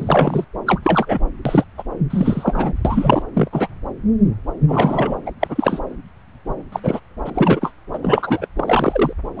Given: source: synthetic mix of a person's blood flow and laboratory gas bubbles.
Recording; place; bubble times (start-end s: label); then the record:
Doppler ultrasound of blood flow; subclavian vein
0.00-0.45 s: bubbles
0.67-1.19 s: bubbles
1.45-1.64 s: bubbles
1.78-1.83 s: bubbles
2.10-2.74 s: bubbles
2.84-3.22 s: bubbles
3.33-3.48 s: bubbles
3.53-3.67 s: bubbles
4.67-5.17 s: bubbles
5.25-5.32 s: bubbles
5.40-5.80 s: bubbles
6.72-6.80 s: bubbles
6.83-7.00 s: bubbles
7.25-7.30 s: bubbles
7.34-7.72 s: bubbles
7.93-7.99 s: bubbles
8.02-8.46 s: bubbles
8.55-9.13 s: bubbles
9.36-9.40 s: bubbles
From the record:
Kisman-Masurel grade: 233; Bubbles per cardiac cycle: several, 3 to 8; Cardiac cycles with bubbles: 50 to 99%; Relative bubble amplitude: loud (0.450 to 0.775); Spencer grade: 3 (all of the cardiac periods contain showers or single bubble signals, but not dominating or overriding the cardiac motion signals); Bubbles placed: anywhere in the cardiac cycle